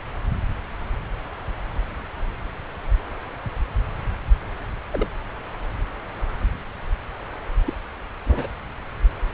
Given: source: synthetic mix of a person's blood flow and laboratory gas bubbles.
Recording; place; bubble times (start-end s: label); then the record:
Doppler ultrasound of blood flow; subclavian vein
4.91-5.08 s: bubbles
7.65-7.73 s: bubbles
8.27-8.47 s: bubbles
From the record:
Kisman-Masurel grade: 121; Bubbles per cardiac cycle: 1 to 2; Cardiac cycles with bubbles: 10 to 50%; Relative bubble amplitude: barely perceptible (0.100 to 0.250); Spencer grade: 2 (many but less than half of the cardiac periods contain bubble signals, singularly or in groups); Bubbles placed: anywhere in the cardiac cycle